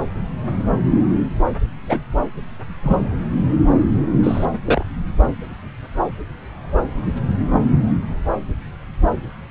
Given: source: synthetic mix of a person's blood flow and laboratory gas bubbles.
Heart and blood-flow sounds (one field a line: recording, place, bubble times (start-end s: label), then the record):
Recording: Doppler ultrasound of blood flow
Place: subclavian vein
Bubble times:
1.88-2.00 s: bubbles
2.83-3.11 s: bubbles
4.23-4.45 s: bubbles
4.67-4.83 s: bubbles
From the record:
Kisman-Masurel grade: 123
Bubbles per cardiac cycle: 1 to 2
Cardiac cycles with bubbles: 10 to 50%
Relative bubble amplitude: loud (0.450 to 0.775)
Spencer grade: 2 (many but less than half of the cardiac periods contain bubble signals, singularly or in groups)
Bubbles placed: anywhere in the cardiac cycle